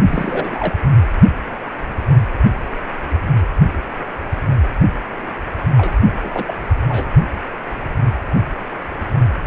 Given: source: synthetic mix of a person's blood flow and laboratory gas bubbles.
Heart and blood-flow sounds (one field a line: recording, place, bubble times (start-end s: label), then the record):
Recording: Doppler ultrasound of blood flow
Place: precordium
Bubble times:
0.07-0.75 s: bubbles
5.77-5.93 s: bubbles
6.21-6.54 s: bubbles
6.88-7.06 s: bubbles
From the record:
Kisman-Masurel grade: 222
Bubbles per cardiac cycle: several, 3 to 8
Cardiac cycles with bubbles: 10 to 50%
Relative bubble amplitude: moderate (0.250 to 0.450)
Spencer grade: 2 (many but less than half of the cardiac periods contain bubble signals, singularly or in groups)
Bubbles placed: anywhere in the cardiac cycle